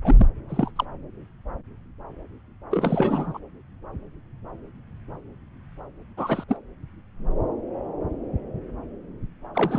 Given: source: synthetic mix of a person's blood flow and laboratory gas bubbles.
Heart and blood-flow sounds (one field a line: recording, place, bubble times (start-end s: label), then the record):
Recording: Doppler ultrasound of blood flow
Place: subclavian vein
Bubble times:
0.04-0.27 s: bubbles
0.49-0.70 s: bubbles
0.76-0.84 s: bubbles
2.71-3.39 s: bubbles
6.17-6.44 s: bubbles
6.48-6.57 s: bubbles
9.54-9.79 s: bubbles
From the record:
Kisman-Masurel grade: 222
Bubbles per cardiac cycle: several, 3 to 8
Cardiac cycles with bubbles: 10 to 50%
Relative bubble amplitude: moderate (0.250 to 0.450)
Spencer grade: 2 (many but less than half of the cardiac periods contain bubble signals, singularly or in groups)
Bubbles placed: anywhere in the cardiac cycle